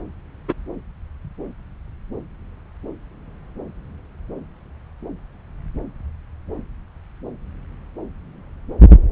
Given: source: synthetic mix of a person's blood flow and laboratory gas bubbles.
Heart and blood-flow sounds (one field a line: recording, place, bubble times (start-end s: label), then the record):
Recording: Doppler ultrasound of blood flow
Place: subclavian vein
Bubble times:
0.48-0.53 s: bubbles
From the record:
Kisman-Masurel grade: 113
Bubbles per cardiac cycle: 1 to 2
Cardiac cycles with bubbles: 1 to 10%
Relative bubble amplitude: loud (0.450 to 0.775)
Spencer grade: 1 (occasional bubble signal discernible with the cardiac motion signal, with majority of cardiac periods free of bubbles)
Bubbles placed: anywhere in the cardiac cycle